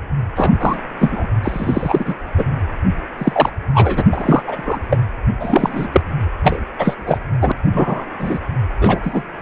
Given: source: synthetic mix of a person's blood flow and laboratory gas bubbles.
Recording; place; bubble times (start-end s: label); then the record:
Doppler ultrasound of blood flow; precordium
0.36-0.51 s: bubbles
0.60-0.81 s: bubbles
1.00-1.27 s: bubbles
1.43-2.15 s: bubbles
2.38-2.44 s: bubbles
3.18-3.49 s: bubbles
3.74-4.04 s: bubbles
4.12-4.43 s: bubbles
4.47-4.79 s: bubbles
4.91-5.08 s: bubbles
5.39-5.88 s: bubbles
5.92-6.01 s: bubbles
6.43-6.64 s: bubbles
6.79-6.95 s: bubbles
6.98-7.17 s: bubbles
7.41-7.52 s: bubbles
7.73-8.04 s: bubbles
8.19-8.39 s: bubbles
8.80-9.00 s: bubbles
9.03-9.23 s: bubbles
From the record:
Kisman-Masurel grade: 243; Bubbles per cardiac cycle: several, 3 to 8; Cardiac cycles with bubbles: 100%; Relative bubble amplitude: loud (0.450 to 0.775); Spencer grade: 3 (all of the cardiac periods contain showers or single bubble signals, but not dominating or overriding the cardiac motion signals); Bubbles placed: anywhere in the cardiac cycle